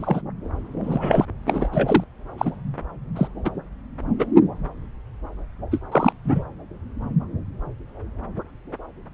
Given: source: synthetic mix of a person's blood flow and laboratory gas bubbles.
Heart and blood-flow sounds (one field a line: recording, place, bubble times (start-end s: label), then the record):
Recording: Doppler ultrasound of blood flow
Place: subclavian vein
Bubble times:
0.00-0.21 s: bubbles
0.83-1.26 s: bubbles
1.46-1.69 s: bubbles
1.71-2.04 s: bubbles
2.38-2.52 s: bubbles
3.15-3.27 s: bubbles
3.45-3.50 s: bubbles
4.19-4.26 s: bubbles
5.71-5.80 s: bubbles
5.91-6.12 s: bubbles
6.25-6.44 s: bubbles
From the record:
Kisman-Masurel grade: 232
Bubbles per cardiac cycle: several, 3 to 8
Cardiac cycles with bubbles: 50 to 99%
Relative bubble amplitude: moderate (0.250 to 0.450)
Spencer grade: 3 (all of the cardiac periods contain showers or single bubble signals, but not dominating or overriding the cardiac motion signals)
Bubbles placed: anywhere in the cardiac cycle